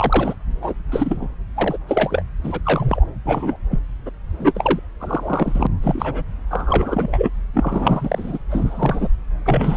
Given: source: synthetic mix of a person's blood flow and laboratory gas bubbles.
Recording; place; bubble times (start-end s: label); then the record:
Doppler ultrasound of blood flow; subclavian vein
0.00-0.35 s: bubbles
0.61-0.73 s: bubbles
0.88-1.35 s: bubbles
1.55-1.78 s: bubbles
1.88-2.22 s: bubbles
2.44-2.61 s: bubbles
2.64-3.05 s: bubbles
3.25-3.56 s: bubbles
3.71-3.79 s: bubbles
4.05-4.10 s: bubbles
4.39-4.79 s: bubbles
5.00-5.67 s: bubbles
5.83-6.23 s: bubbles
6.50-7.29 s: bubbles
7.54-8.38 s: bubbles
8.50-9.08 s: bubbles
9.46-9.77 s: bubbles
From the record:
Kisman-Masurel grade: 242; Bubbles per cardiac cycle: several, 3 to 8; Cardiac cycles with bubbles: 100%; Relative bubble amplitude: moderate (0.250 to 0.450); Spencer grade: 3 (all of the cardiac periods contain showers or single bubble signals, but not dominating or overriding the cardiac motion signals); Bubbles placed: anywhere in the cardiac cycle